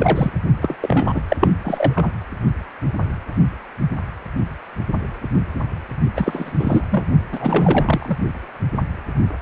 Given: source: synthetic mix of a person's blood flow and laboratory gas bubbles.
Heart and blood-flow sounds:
Doppler ultrasound of blood flow; precordium
0.00-0.33 s: bubbles
0.60-0.76 s: bubbles
0.82-1.22 s: bubbles
1.29-1.36 s: bubbles
1.40-1.49 s: bubbles
1.64-2.12 s: bubbles
6.16-6.53 s: bubbles
6.59-6.85 s: bubbles
6.90-7.04 s: bubbles
7.33-8.18 s: bubbles
From the record:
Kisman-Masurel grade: 333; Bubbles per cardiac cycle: rolling drumbeat, 9 or more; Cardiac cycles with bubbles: 50 to 99%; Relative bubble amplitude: loud (0.450 to 0.775); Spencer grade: 3 (all of the cardiac periods contain showers or single bubble signals, but not dominating or overriding the cardiac motion signals); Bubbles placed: only in the low amplitude regions of the cardiac cycle

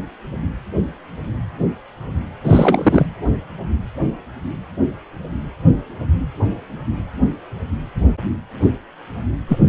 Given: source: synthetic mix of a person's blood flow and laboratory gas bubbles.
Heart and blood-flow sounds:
Doppler ultrasound of blood flow; precordium
2.44-3.06 s: bubbles
9.49-9.58 s: bubbles
From the record:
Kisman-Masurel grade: 213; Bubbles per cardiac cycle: several, 3 to 8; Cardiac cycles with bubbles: 1 to 10%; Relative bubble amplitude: loud (0.450 to 0.775); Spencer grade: 1 (occasional bubble signal discernible with the cardiac motion signal, with majority of cardiac periods free of bubbles); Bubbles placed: anywhere in the cardiac cycle

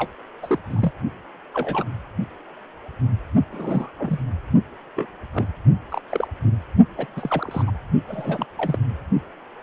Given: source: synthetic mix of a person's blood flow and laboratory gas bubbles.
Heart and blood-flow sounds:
Doppler ultrasound of blood flow; precordium
0.00-0.10 s: bubbles
0.42-0.59 s: bubbles
0.70-0.92 s: bubbles
1.54-1.84 s: bubbles
3.52-3.89 s: bubbles
3.98-4.19 s: bubbles
4.96-5.06 s: bubbles
5.34-5.47 s: bubbles
5.90-6.00 s: bubbles
6.09-6.27 s: bubbles
6.97-7.06 s: bubbles
7.16-7.63 s: bubbles
7.67-7.71 s: bubbles
8.07-8.46 s: bubbles
8.57-8.78 s: bubbles
From the record:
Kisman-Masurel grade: 232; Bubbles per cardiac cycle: several, 3 to 8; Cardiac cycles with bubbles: 50 to 99%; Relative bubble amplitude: moderate (0.250 to 0.450); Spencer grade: 3 (all of the cardiac periods contain showers or single bubble signals, but not dominating or overriding the cardiac motion signals); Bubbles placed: only in the low amplitude regions of the cardiac cycle

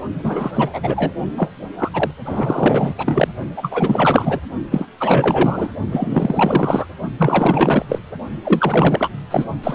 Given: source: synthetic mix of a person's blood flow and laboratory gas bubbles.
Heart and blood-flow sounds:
Doppler ultrasound of blood flow; precordium
0.23-0.51 s: bubbles
0.54-0.70 s: bubbles
0.73-1.14 s: bubbles
1.36-1.51 s: bubbles
1.79-1.90 s: bubbles
1.94-2.11 s: bubbles
2.25-2.94 s: bubbles
2.97-3.33 s: bubbles
3.56-4.41 s: bubbles
4.71-4.86 s: bubbles
5.00-5.70 s: bubbles
5.91-6.87 s: bubbles
7.18-7.85 s: bubbles
7.89-8.00 s: bubbles
8.44-9.10 s: bubbles
9.30-9.44 s: bubbles
9.63-9.75 s: bubbles
From the record:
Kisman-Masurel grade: 444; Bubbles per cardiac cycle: continuous sound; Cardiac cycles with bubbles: 100%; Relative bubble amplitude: maximal (0.775 to 0.999); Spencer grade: 4 (maximum detectable bubble signal sounding continuously throughout systole and diastole of every cardiac period, and overriding the amplitude of the normal cardiac signals); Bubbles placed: only in the low amplitude regions of the cardiac cycle

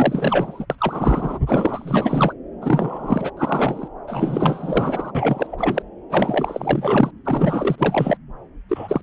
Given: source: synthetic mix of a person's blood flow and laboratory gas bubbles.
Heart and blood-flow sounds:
Doppler ultrasound of blood flow; subclavian vein
0.00-0.66 s: bubbles
0.70-1.39 s: bubbles
1.46-2.33 s: bubbles
2.62-3.31 s: bubbles
3.37-3.88 s: bubbles
4.07-5.12 s: bubbles
5.15-5.83 s: bubbles
6.10-7.11 s: bubbles
7.24-7.75 s: bubbles
7.78-8.17 s: bubbles
8.68-9.01 s: bubbles
From the record:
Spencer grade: 4 (maximum detectable bubble signal sounding continuously throughout systole and diastole of every cardiac period, and overriding the amplitude of the normal cardiac signals); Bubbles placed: anywhere in the cardiac cycle

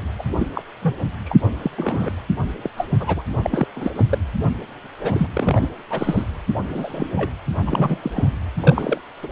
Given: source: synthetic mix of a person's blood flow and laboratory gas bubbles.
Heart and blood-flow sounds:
Doppler ultrasound of blood flow; precordium
0.18-0.24 s: bubbles
0.37-0.47 s: bubbles
0.54-0.63 s: bubbles
0.82-0.96 s: bubbles
1.25-1.36 s: bubbles
1.62-1.71 s: bubbles
1.77-2.11 s: bubbles
2.62-2.70 s: bubbles
2.77-2.88 s: bubbles
3.00-3.22 s: bubbles
3.42-3.67 s: bubbles
3.76-3.92 s: bubbles
3.95-4.05 s: bubbles
4.09-4.18 s: bubbles
5.03-5.27 s: bubbles
5.33-5.68 s: bubbles
5.90-6.24 s: bubbles
6.69-7.09 s: bubbles
7.15-7.30 s: bubbles
7.62-7.98 s: bubbles
8.02-8.11 s: bubbles
8.14-8.29 s: bubbles
8.60-9.01 s: bubbles
9.23-9.28 s: bubbles
From the record:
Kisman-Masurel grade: 232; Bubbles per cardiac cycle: several, 3 to 8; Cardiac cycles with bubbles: 50 to 99%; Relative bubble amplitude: moderate (0.250 to 0.450); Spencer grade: 3 (all of the cardiac periods contain showers or single bubble signals, but not dominating or overriding the cardiac motion signals); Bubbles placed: anywhere in the cardiac cycle

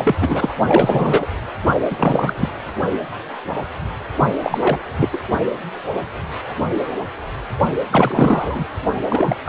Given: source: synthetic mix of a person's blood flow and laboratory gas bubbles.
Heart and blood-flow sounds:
Doppler ultrasound of blood flow; precordium
0.00-0.15 s: bubbles
0.21-0.53 s: bubbles
0.65-1.26 s: bubbles
1.90-2.49 s: bubbles
4.42-4.78 s: bubbles
4.99-5.09 s: bubbles
5.12-5.19 s: bubbles
7.92-8.67 s: bubbles
9.09-9.37 s: bubbles
9.44-9.49 s: bubbles
From the record:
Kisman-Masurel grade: 333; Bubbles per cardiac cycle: rolling drumbeat, 9 or more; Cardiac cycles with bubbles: 50 to 99%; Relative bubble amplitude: loud (0.450 to 0.775); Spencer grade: 3 (all of the cardiac periods contain showers or single bubble signals, but not dominating or overriding the cardiac motion signals); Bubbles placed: only in the low amplitude regions of the cardiac cycle

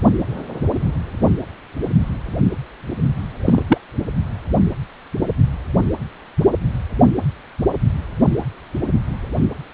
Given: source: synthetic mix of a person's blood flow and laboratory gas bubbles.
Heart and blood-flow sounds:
Doppler ultrasound of blood flow; precordium
3.45-3.62 s: bubbles
3.67-3.78 s: bubbles
From the record:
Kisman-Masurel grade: 113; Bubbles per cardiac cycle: 1 to 2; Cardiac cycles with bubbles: 1 to 10%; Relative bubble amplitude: loud (0.450 to 0.775); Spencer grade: 1 (occasional bubble signal discernible with the cardiac motion signal, with majority of cardiac periods free of bubbles); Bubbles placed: anywhere in the cardiac cycle

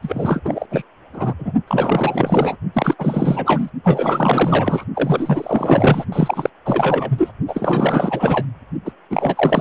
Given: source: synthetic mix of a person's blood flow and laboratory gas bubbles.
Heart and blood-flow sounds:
Doppler ultrasound of blood flow; precordium
0.02-0.83 s: bubbles
1.13-1.34 s: bubbles
1.39-1.52 s: bubbles
1.67-2.57 s: bubbles
2.73-2.95 s: bubbles
2.98-3.70 s: bubbles
3.83-4.84 s: bubbles
4.95-6.05 s: bubbles
6.12-6.50 s: bubbles
6.64-7.32 s: bubbles
7.47-8.48 s: bubbles
8.85-8.92 s: bubbles
9.10-9.61 s: bubbles
From the record:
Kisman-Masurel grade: 444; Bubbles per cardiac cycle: continuous sound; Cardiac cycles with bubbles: 100%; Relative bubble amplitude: maximal (0.775 to 0.999); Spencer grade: 4 (maximum detectable bubble signal sounding continuously throughout systole and diastole of every cardiac period, and overriding the amplitude of the normal cardiac signals); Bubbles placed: only in the low amplitude regions of the cardiac cycle

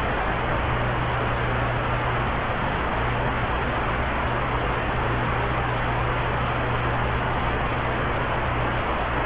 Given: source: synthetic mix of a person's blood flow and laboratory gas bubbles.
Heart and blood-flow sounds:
Doppler ultrasound of blood flow; subclavian vein
2.71-2.77 s: bubbles
3.25-3.29 s: bubbles
From the record:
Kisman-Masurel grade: 111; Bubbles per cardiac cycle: 1 to 2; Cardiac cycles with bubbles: 1 to 10%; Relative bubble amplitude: barely perceptible (0.100 to 0.250); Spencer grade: 1 (occasional bubble signal discernible with the cardiac motion signal, with majority of cardiac periods free of bubbles); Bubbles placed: anywhere in the cardiac cycle

